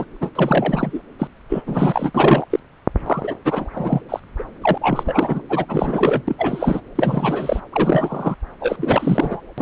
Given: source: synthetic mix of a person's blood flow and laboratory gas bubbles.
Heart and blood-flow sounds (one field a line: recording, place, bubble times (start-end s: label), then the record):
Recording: Doppler ultrasound of blood flow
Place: subclavian vein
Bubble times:
0.00-0.05 s: bubbles
0.21-0.30 s: bubbles
0.35-1.01 s: bubbles
1.19-1.27 s: bubbles
1.48-1.62 s: bubbles
1.66-2.11 s: bubbles
2.14-2.46 s: bubbles
2.50-2.59 s: bubbles
3.06-3.34 s: bubbles
3.44-3.69 s: bubbles
3.75-4.01 s: bubbles
4.08-4.20 s: bubbles
4.38-4.43 s: bubbles
4.62-4.78 s: bubbles
4.81-5.42 s: bubbles
5.49-5.65 s: bubbles
5.68-6.21 s: bubbles
6.27-6.80 s: bubbles
6.96-7.60 s: bubbles
7.72-8.35 s: bubbles
8.61-9.42 s: bubbles
9.58-9.61 s: bubbles
From the record:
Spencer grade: 3 (all of the cardiac periods contain showers or single bubble signals, but not dominating or overriding the cardiac motion signals)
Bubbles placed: anywhere in the cardiac cycle